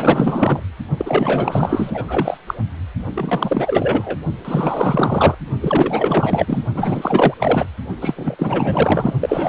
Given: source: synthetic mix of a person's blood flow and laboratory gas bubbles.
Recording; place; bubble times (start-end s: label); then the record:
Doppler ultrasound of blood flow; precordium
0.00-0.61 s: bubbles
0.97-2.38 s: bubbles
2.47-2.54 s: bubbles
3.14-4.17 s: bubbles
4.44-5.35 s: bubbles
5.61-6.63 s: bubbles
6.74-7.34 s: bubbles
7.39-7.65 s: bubbles
8.01-8.35 s: bubbles
8.38-9.13 s: bubbles
9.20-9.49 s: bubbles
From the record:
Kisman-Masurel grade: 444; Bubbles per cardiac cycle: continuous sound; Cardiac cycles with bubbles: 100%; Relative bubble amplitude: maximal (0.775 to 0.999); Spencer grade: 4 (maximum detectable bubble signal sounding continuously throughout systole and diastole of every cardiac period, and overriding the amplitude of the normal cardiac signals); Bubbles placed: only in the low amplitude regions of the cardiac cycle